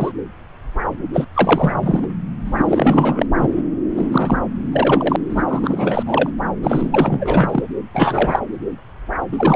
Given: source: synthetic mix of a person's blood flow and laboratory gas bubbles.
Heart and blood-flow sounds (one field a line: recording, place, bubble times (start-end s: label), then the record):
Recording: Doppler ultrasound of blood flow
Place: subclavian vein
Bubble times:
0.00-0.11 s: bubbles
1.13-1.25 s: bubbles
1.34-2.08 s: bubbles
2.45-3.26 s: bubbles
3.37-3.48 s: bubbles
3.97-4.38 s: bubbles
4.72-5.16 s: bubbles
5.29-5.42 s: bubbles
5.47-6.03 s: bubbles
6.05-6.30 s: bubbles
6.63-7.62 s: bubbles
7.69-7.73 s: bubbles
7.94-8.40 s: bubbles
9.32-9.56 s: bubbles
From the record:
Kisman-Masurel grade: 333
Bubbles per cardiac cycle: rolling drumbeat, 9 or more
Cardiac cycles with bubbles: 50 to 99%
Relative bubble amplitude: loud (0.450 to 0.775)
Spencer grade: 3 (all of the cardiac periods contain showers or single bubble signals, but not dominating or overriding the cardiac motion signals)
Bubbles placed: anywhere in the cardiac cycle